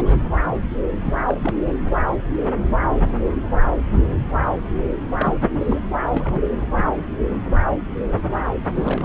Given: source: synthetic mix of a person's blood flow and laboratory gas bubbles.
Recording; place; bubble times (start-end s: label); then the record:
Doppler ultrasound of blood flow; subclavian vein
0.00-0.15 s: bubbles
1.03-1.56 s: bubbles
1.65-1.74 s: bubbles
5.17-5.36 s: bubbles
5.61-5.81 s: bubbles
6.12-6.41 s: bubbles
8.75-9.05 s: bubbles
From the record:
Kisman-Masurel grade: 232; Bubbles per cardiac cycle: several, 3 to 8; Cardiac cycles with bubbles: 50 to 99%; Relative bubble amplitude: moderate (0.250 to 0.450); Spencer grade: 3 (all of the cardiac periods contain showers or single bubble signals, but not dominating or overriding the cardiac motion signals); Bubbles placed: anywhere in the cardiac cycle